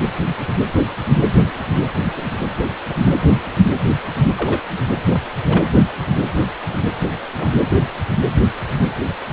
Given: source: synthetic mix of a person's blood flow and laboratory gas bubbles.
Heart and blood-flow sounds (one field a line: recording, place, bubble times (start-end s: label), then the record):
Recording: Doppler ultrasound of blood flow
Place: precordium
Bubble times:
4.35-4.61 s: bubbles
5.09-5.22 s: bubbles
5.44-5.65 s: bubbles
6.36-6.45 s: bubbles
6.69-6.85 s: bubbles
7.38-7.49 s: bubbles
From the record:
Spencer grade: 2 (many but less than half of the cardiac periods contain bubble signals, singularly or in groups)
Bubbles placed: anywhere in the cardiac cycle